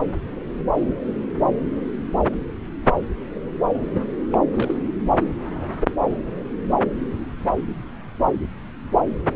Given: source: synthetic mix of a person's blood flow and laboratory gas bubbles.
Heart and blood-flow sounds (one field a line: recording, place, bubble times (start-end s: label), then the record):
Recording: Doppler ultrasound of blood flow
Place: subclavian vein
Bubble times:
4.33-4.38 s: bubbles
4.56-4.79 s: bubbles
From the record:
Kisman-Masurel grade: 211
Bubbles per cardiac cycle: several, 3 to 8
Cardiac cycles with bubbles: 1 to 10%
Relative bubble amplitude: barely perceptible (0.100 to 0.250)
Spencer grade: 1 (occasional bubble signal discernible with the cardiac motion signal, with majority of cardiac periods free of bubbles)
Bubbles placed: anywhere in the cardiac cycle